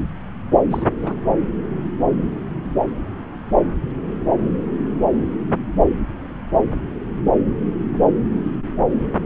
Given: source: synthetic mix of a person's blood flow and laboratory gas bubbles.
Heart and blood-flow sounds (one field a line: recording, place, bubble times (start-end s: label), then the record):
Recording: Doppler ultrasound of blood flow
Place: subclavian vein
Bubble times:
0.70-0.87 s: bubbles
1.02-1.14 s: bubbles
From the record:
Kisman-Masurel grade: 212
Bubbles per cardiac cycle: several, 3 to 8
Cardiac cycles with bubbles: 1 to 10%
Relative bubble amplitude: moderate (0.250 to 0.450)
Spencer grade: 1 (occasional bubble signal discernible with the cardiac motion signal, with majority of cardiac periods free of bubbles)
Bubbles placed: anywhere in the cardiac cycle